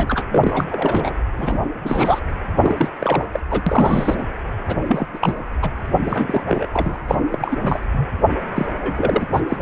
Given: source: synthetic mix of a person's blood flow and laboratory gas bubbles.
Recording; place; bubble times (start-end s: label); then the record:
Doppler ultrasound of blood flow; precordium
0.00-0.24 s: bubbles
0.30-0.66 s: bubbles
0.70-1.13 s: bubbles
1.38-1.62 s: bubbles
1.84-2.20 s: bubbles
2.56-2.89 s: bubbles
3.00-3.27 s: bubbles
3.33-3.40 s: bubbles
3.50-3.61 s: bubbles
3.67-4.24 s: bubbles
4.67-4.77 s: bubbles
4.87-5.07 s: bubbles
5.13-5.19 s: bubbles
5.21-5.33 s: bubbles
5.62-5.70 s: bubbles
5.96-6.67 s: bubbles
6.72-6.98 s: bubbles
7.08-7.16 s: bubbles
7.32-7.80 s: bubbles
7.92-8.05 s: bubbles
8.55-8.66 s: bubbles
8.70-9.26 s: bubbles
9.32-9.40 s: bubbles
9.48-9.57 s: bubbles
From the record:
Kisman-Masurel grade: 342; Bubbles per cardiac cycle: rolling drumbeat, 9 or more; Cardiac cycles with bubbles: 100%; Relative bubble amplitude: moderate (0.250 to 0.450); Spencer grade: 3 (all of the cardiac periods contain showers or single bubble signals, but not dominating or overriding the cardiac motion signals); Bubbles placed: anywhere in the cardiac cycle